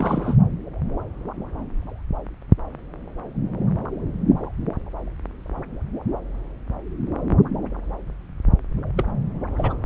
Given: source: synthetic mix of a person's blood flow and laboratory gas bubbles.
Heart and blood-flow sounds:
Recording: Doppler ultrasound of blood flow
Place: subclavian vein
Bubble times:
0.00-0.36 s: bubbles
8.97-9.04 s: bubbles
9.57-9.76 s: bubbles
From the record:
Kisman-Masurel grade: 211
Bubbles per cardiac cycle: several, 3 to 8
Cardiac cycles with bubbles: 1 to 10%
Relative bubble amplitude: barely perceptible (0.100 to 0.250)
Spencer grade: 1 (occasional bubble signal discernible with the cardiac motion signal, with majority of cardiac periods free of bubbles)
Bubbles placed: anywhere in the cardiac cycle

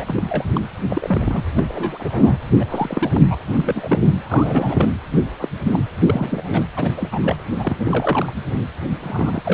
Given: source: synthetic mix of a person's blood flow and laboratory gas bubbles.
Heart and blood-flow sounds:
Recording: Doppler ultrasound of blood flow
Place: precordium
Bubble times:
0.00-0.23 s: bubbles
0.28-0.44 s: bubbles
0.54-0.60 s: bubbles
0.90-1.43 s: bubbles
1.55-1.66 s: bubbles
1.68-2.37 s: bubbles
2.60-2.66 s: bubbles
2.70-3.10 s: bubbles
3.14-3.36 s: bubbles
3.53-3.99 s: bubbles
4.21-4.90 s: bubbles
5.12-5.22 s: bubbles
5.39-5.49 s: bubbles
5.65-5.79 s: bubbles
6.03-6.64 s: bubbles
6.76-7.42 s: bubbles
7.58-8.33 s: bubbles
9.02-9.54 s: bubbles
From the record:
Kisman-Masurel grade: 242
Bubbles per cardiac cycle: several, 3 to 8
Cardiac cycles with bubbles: 100%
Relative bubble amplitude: moderate (0.250 to 0.450)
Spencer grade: 3 (all of the cardiac periods contain showers or single bubble signals, but not dominating or overriding the cardiac motion signals)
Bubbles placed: anywhere in the cardiac cycle

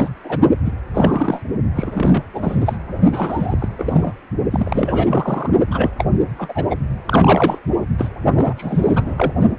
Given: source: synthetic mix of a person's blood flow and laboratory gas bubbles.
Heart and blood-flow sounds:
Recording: Doppler ultrasound of blood flow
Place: precordium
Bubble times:
0.00-0.10 s: bubbles
0.24-0.39 s: bubbles
0.65-0.72 s: bubbles
0.93-1.42 s: bubbles
1.74-2.23 s: bubbles
2.33-2.79 s: bubbles
3.11-3.69 s: bubbles
3.79-4.14 s: bubbles
4.51-5.50 s: bubbles
5.71-5.94 s: bubbles
5.98-6.05 s: bubbles
6.38-6.66 s: bubbles
6.70-6.76 s: bubbles
7.06-7.59 s: bubbles
7.98-8.10 s: bubbles
8.34-8.54 s: bubbles
8.57-9.33 s: bubbles
From the record:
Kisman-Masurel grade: 332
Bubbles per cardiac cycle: rolling drumbeat, 9 or more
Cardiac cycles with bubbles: 50 to 99%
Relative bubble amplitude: moderate (0.250 to 0.450)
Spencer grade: 3 (all of the cardiac periods contain showers or single bubble signals, but not dominating or overriding the cardiac motion signals)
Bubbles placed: only in the low amplitude regions of the cardiac cycle

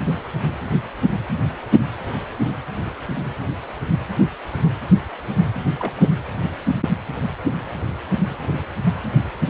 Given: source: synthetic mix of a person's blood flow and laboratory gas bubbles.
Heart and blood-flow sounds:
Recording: Doppler ultrasound of blood flow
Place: precordium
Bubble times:
5.79-5.92 s: bubbles
6.00-6.10 s: bubbles
From the record:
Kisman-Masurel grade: 121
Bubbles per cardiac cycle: 1 to 2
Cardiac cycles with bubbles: 10 to 50%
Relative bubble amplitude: barely perceptible (0.100 to 0.250)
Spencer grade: 2 (many but less than half of the cardiac periods contain bubble signals, singularly or in groups)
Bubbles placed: anywhere in the cardiac cycle

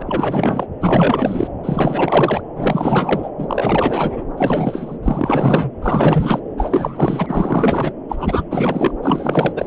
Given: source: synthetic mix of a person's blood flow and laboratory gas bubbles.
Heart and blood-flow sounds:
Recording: Doppler ultrasound of blood flow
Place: subclavian vein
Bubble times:
0.00-0.02 s: bubbles
0.07-0.67 s: bubbles
0.80-1.48 s: bubbles
1.63-2.41 s: bubbles
2.55-3.30 s: bubbles
3.38-4.22 s: bubbles
4.38-4.97 s: bubbles
5.02-5.71 s: bubbles
5.82-6.39 s: bubbles
6.58-7.92 s: bubbles
8.09-8.44 s: bubbles
8.50-8.92 s: bubbles
9.02-9.53 s: bubbles
9.56-9.66 s: bubbles
From the record:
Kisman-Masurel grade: 444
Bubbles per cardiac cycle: continuous sound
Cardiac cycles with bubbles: 100%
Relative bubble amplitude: maximal (0.775 to 0.999)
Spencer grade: 4 (maximum detectable bubble signal sounding continuously throughout systole and diastole of every cardiac period, and overriding the amplitude of the normal cardiac signals)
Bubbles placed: anywhere in the cardiac cycle

